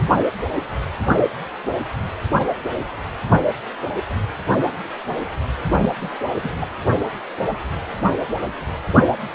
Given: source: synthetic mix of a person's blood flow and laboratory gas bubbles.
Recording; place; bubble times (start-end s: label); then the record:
Doppler ultrasound of blood flow; precordium
5.70-5.78 s: bubbles
5.82-5.95 s: bubbles
6.01-6.16 s: bubbles
6.43-6.50 s: bubbles
6.61-6.67 s: bubbles
From the record:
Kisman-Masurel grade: 211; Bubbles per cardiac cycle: several, 3 to 8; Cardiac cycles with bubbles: 1 to 10%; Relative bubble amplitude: barely perceptible (0.100 to 0.250); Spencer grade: 1 (occasional bubble signal discernible with the cardiac motion signal, with majority of cardiac periods free of bubbles); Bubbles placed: anywhere in the cardiac cycle